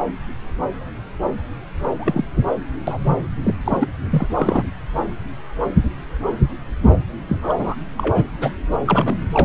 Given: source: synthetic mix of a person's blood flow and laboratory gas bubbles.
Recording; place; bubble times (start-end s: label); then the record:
Doppler ultrasound of blood flow; subclavian vein
1.99-2.24 s: bubbles
2.87-2.98 s: bubbles
3.04-3.19 s: bubbles
3.43-3.55 s: bubbles
3.65-3.88 s: bubbles
4.10-4.27 s: bubbles
4.35-4.67 s: bubbles
7.27-7.75 s: bubbles
7.97-8.25 s: bubbles
8.40-8.50 s: bubbles
8.87-9.17 s: bubbles
9.32-9.45 s: bubbles
From the record:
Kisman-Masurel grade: 232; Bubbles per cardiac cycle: several, 3 to 8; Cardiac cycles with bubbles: 50 to 99%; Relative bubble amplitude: moderate (0.250 to 0.450); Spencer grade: 3 (all of the cardiac periods contain showers or single bubble signals, but not dominating or overriding the cardiac motion signals); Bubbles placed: anywhere in the cardiac cycle